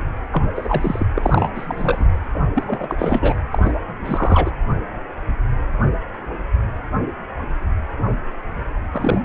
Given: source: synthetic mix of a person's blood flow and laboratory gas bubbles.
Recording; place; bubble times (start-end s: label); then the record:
Doppler ultrasound of blood flow; precordium
0.32-0.48 s: bubbles
0.55-1.06 s: bubbles
1.15-1.50 s: bubbles
1.55-2.06 s: bubbles
2.34-2.40 s: bubbles
2.54-2.63 s: bubbles
2.67-3.36 s: bubbles
3.51-3.71 s: bubbles
4.00-4.50 s: bubbles
8.92-9.21 s: bubbles
From the record:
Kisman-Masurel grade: 332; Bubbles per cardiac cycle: rolling drumbeat, 9 or more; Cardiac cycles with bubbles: 50 to 99%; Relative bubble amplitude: moderate (0.250 to 0.450); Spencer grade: 3 (all of the cardiac periods contain showers or single bubble signals, but not dominating or overriding the cardiac motion signals); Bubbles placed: anywhere in the cardiac cycle